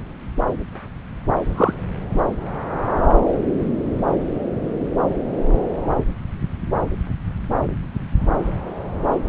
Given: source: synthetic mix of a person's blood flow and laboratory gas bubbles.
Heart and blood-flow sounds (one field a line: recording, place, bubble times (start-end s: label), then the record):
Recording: Doppler ultrasound of blood flow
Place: subclavian vein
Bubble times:
1.43-1.75 s: bubbles
9.24-9.29 s: bubbles
From the record:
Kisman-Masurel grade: 123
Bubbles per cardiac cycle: 1 to 2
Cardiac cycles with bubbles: 10 to 50%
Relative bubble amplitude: loud (0.450 to 0.775)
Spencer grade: 2 (many but less than half of the cardiac periods contain bubble signals, singularly or in groups)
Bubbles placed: anywhere in the cardiac cycle